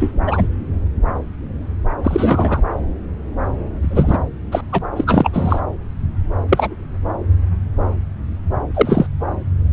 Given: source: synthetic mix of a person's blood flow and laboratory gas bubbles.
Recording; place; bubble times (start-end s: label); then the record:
Doppler ultrasound of blood flow; subclavian vein
0.00-0.11 s: bubbles
0.27-0.48 s: bubbles
2.04-2.62 s: bubbles
3.81-4.19 s: bubbles
4.51-4.61 s: bubbles
4.72-4.79 s: bubbles
4.96-5.62 s: bubbles
6.49-6.75 s: bubbles
8.74-9.06 s: bubbles
From the record:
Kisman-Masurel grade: 223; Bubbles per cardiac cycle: several, 3 to 8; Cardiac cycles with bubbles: 10 to 50%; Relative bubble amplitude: loud (0.450 to 0.775); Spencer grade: 2 (many but less than half of the cardiac periods contain bubble signals, singularly or in groups); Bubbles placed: anywhere in the cardiac cycle